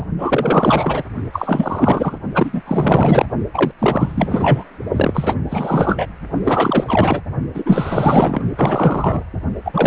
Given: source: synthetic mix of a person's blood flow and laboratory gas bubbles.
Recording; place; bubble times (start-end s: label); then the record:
Doppler ultrasound of blood flow; precordium
0.00-0.06 s: bubbles
0.18-1.04 s: bubbles
1.32-2.18 s: bubbles
2.34-2.62 s: bubbles
2.66-3.25 s: bubbles
3.54-3.71 s: bubbles
3.79-4.64 s: bubbles
4.92-5.34 s: bubbles
5.49-6.07 s: bubbles
6.43-7.21 s: bubbles
7.54-8.41 s: bubbles
8.56-9.24 s: bubbles
9.65-9.87 s: bubbles
From the record:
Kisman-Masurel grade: 444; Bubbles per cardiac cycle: continuous sound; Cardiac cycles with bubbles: 100%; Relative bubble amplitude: maximal (0.775 to 0.999); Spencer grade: 4 (maximum detectable bubble signal sounding continuously throughout systole and diastole of every cardiac period, and overriding the amplitude of the normal cardiac signals); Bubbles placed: only in the low amplitude regions of the cardiac cycle